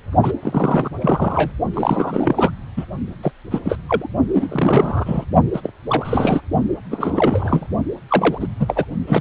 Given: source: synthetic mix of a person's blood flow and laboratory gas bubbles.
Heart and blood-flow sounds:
Doppler ultrasound of blood flow; precordium
0.22-0.32 s: bubbles
0.41-0.90 s: bubbles
1.01-1.52 s: bubbles
1.73-2.51 s: bubbles
2.77-2.85 s: bubbles
3.22-3.32 s: bubbles
3.50-3.60 s: bubbles
3.65-3.77 s: bubbles
3.89-4.08 s: bubbles
4.33-5.25 s: bubbles
5.54-5.71 s: bubbles
5.88-6.41 s: bubbles
6.91-7.67 s: bubbles
8.08-8.47 s: bubbles
8.59-8.85 s: bubbles
9.07-9.21 s: bubbles
From the record:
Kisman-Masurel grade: 343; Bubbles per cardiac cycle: rolling drumbeat, 9 or more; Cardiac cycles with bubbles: 100%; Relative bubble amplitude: loud (0.450 to 0.775); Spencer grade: 3 (all of the cardiac periods contain showers or single bubble signals, but not dominating or overriding the cardiac motion signals); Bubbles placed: only in the low amplitude regions of the cardiac cycle

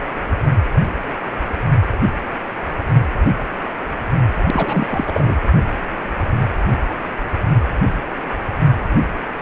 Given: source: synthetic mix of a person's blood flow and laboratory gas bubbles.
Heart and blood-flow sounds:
Doppler ultrasound of blood flow; precordium
4.43-5.35 s: bubbles
From the record:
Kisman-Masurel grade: 213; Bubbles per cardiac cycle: several, 3 to 8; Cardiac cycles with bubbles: 1 to 10%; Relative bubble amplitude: loud (0.450 to 0.775); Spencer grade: 1 (occasional bubble signal discernible with the cardiac motion signal, with majority of cardiac periods free of bubbles); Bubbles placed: only in the low amplitude regions of the cardiac cycle

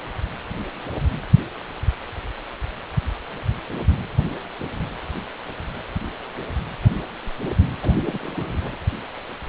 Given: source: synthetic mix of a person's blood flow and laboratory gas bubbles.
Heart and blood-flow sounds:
Doppler ultrasound of blood flow; precordium
7.81-7.92 s: bubbles
7.96-8.77 s: bubbles
From the record:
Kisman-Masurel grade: 211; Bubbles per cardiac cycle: several, 3 to 8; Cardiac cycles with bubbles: 1 to 10%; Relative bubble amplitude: barely perceptible (0.100 to 0.250); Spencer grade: 1 (occasional bubble signal discernible with the cardiac motion signal, with majority of cardiac periods free of bubbles); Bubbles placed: anywhere in the cardiac cycle

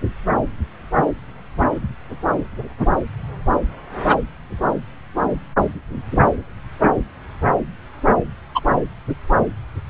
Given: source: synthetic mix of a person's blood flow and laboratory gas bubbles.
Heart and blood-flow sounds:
Doppler ultrasound of blood flow; subclavian vein
8.54-8.61 s: bubbles
From the record:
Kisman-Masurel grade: 113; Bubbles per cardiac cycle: 1 to 2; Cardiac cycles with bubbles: 1 to 10%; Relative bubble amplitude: loud (0.450 to 0.775); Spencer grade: 1 (occasional bubble signal discernible with the cardiac motion signal, with majority of cardiac periods free of bubbles); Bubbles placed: anywhere in the cardiac cycle

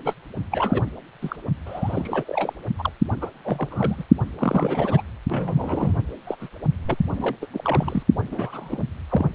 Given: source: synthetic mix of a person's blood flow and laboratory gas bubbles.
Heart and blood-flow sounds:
Doppler ultrasound of blood flow; precordium
0.00-0.13 s: bubbles
0.51-0.83 s: bubbles
1.21-1.36 s: bubbles
1.66-2.55 s: bubbles
2.79-2.92 s: bubbles
3.21-3.29 s: bubbles
3.44-4.04 s: bubbles
4.38-5.02 s: bubbles
5.28-6.04 s: bubbles
6.27-6.36 s: bubbles
6.41-6.48 s: bubbles
6.86-6.96 s: bubbles
7.13-7.36 s: bubbles
7.42-7.46 s: bubbles
7.53-8.03 s: bubbles
8.31-8.84 s: bubbles
9.09-9.29 s: bubbles
From the record:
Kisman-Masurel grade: 342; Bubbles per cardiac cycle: rolling drumbeat, 9 or more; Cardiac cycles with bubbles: 100%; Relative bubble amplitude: moderate (0.250 to 0.450); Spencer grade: 3 (all of the cardiac periods contain showers or single bubble signals, but not dominating or overriding the cardiac motion signals); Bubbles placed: only in the low amplitude regions of the cardiac cycle

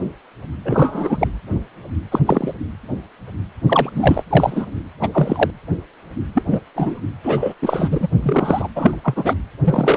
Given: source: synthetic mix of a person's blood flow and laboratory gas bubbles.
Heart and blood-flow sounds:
Doppler ultrasound of blood flow; precordium
0.65-1.27 s: bubbles
2.12-2.21 s: bubbles
2.26-2.53 s: bubbles
3.66-4.22 s: bubbles
4.29-4.65 s: bubbles
5.01-5.09 s: bubbles
5.14-5.50 s: bubbles
6.34-6.42 s: bubbles
6.50-6.60 s: bubbles
6.75-7.00 s: bubbles
7.22-7.54 s: bubbles
7.62-8.08 s: bubbles
8.23-8.68 s: bubbles
8.76-8.96 s: bubbles
9.04-9.34 s: bubbles
9.64-9.96 s: bubbles
From the record:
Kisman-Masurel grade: 233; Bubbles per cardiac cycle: several, 3 to 8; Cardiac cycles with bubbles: 50 to 99%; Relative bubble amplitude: loud (0.450 to 0.775); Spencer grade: 3 (all of the cardiac periods contain showers or single bubble signals, but not dominating or overriding the cardiac motion signals); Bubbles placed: anywhere in the cardiac cycle

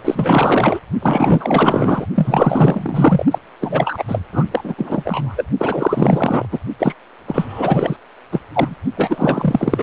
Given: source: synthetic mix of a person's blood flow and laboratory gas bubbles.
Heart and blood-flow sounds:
Doppler ultrasound of blood flow; precordium
0.04-0.79 s: bubbles
1.01-2.06 s: bubbles
2.15-3.25 s: bubbles
3.31-3.39 s: bubbles
3.60-4.03 s: bubbles
4.08-4.21 s: bubbles
4.32-4.45 s: bubbles
4.50-4.75 s: bubbles
4.77-5.45 s: bubbles
5.58-6.46 s: bubbles
6.51-6.58 s: bubbles
6.79-6.95 s: bubbles
7.27-7.97 s: bubbles
8.31-8.40 s: bubbles
8.54-8.75 s: bubbles
8.96-9.83 s: bubbles
From the record:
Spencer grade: 4 (maximum detectable bubble signal sounding continuously throughout systole and diastole of every cardiac period, and overriding the amplitude of the normal cardiac signals); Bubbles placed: only in the low amplitude regions of the cardiac cycle

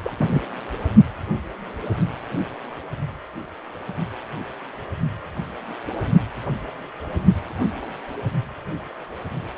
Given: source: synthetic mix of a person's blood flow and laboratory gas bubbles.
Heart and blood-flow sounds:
Doppler ultrasound of blood flow; precordium
0.05-0.12 s: bubbles
0.20-0.39 s: bubbles
From the record:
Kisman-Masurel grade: 113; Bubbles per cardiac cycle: 1 to 2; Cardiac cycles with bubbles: 1 to 10%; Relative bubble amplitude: loud (0.450 to 0.775); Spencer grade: 1 (occasional bubble signal discernible with the cardiac motion signal, with majority of cardiac periods free of bubbles); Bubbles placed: only in the low amplitude regions of the cardiac cycle

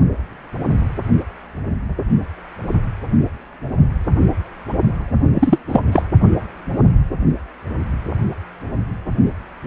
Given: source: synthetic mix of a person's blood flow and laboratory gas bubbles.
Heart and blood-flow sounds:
Doppler ultrasound of blood flow; precordium
5.34-5.58 s: bubbles
5.68-5.80 s: bubbles
5.92-6.02 s: bubbles
From the record:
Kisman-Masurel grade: 213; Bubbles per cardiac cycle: several, 3 to 8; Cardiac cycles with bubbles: 1 to 10%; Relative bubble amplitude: loud (0.450 to 0.775); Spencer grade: 1 (occasional bubble signal discernible with the cardiac motion signal, with majority of cardiac periods free of bubbles); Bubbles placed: only in the low amplitude regions of the cardiac cycle

